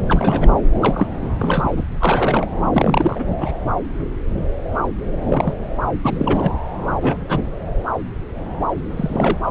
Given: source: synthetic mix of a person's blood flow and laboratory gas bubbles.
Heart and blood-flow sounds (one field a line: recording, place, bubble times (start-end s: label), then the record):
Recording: Doppler ultrasound of blood flow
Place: subclavian vein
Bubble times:
0.07-0.53 s: bubbles
0.81-1.07 s: bubbles
1.39-1.86 s: bubbles
2.00-2.47 s: bubbles
2.72-3.25 s: bubbles
3.40-3.51 s: bubbles
5.29-5.54 s: bubbles
6.01-6.51 s: bubbles
6.90-7.18 s: bubbles
7.27-7.42 s: bubbles
8.92-9.38 s: bubbles
9.45-9.51 s: bubbles
From the record:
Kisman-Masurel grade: 232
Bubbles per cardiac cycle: several, 3 to 8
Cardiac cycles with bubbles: 50 to 99%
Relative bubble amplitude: moderate (0.250 to 0.450)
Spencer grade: 3 (all of the cardiac periods contain showers or single bubble signals, but not dominating or overriding the cardiac motion signals)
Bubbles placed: anywhere in the cardiac cycle